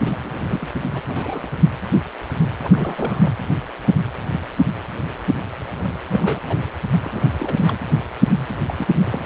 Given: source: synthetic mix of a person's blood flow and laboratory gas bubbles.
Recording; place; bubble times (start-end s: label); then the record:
Doppler ultrasound of blood flow; precordium
0.02-0.16 s: bubbles
0.23-0.45 s: bubbles
0.48-0.69 s: bubbles
0.94-1.01 s: bubbles
1.07-1.48 s: bubbles
2.62-3.33 s: bubbles
5.82-5.92 s: bubbles
6.09-6.41 s: bubbles
6.48-6.56 s: bubbles
7.00-7.32 s: bubbles
7.39-7.80 s: bubbles
8.66-8.74 s: bubbles
8.79-8.87 s: bubbles
9.02-9.20 s: bubbles
From the record:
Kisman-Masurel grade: 221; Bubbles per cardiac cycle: several, 3 to 8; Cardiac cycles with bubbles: 10 to 50%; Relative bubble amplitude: barely perceptible (0.100 to 0.250); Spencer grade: 2 (many but less than half of the cardiac periods contain bubble signals, singularly or in groups); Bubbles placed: anywhere in the cardiac cycle